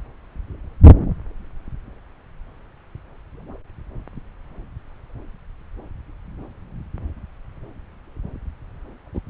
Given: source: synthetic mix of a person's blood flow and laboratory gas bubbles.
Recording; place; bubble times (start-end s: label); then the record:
Doppler ultrasound of blood flow; subclavian vein
9.14-9.21 s: bubbles
From the record:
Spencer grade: 1 (occasional bubble signal discernible with the cardiac motion signal, with majority of cardiac periods free of bubbles); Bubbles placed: anywhere in the cardiac cycle